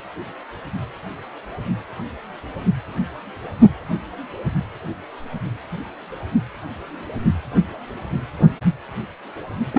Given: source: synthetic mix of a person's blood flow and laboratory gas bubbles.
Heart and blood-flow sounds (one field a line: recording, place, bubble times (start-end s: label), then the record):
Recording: Doppler ultrasound of blood flow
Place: precordium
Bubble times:
9.72-9.79 s: bubbles
From the record:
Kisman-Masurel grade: 212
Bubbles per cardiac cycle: several, 3 to 8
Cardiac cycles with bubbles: 1 to 10%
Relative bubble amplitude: moderate (0.250 to 0.450)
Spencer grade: 1 (occasional bubble signal discernible with the cardiac motion signal, with majority of cardiac periods free of bubbles)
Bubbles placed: only in the low amplitude regions of the cardiac cycle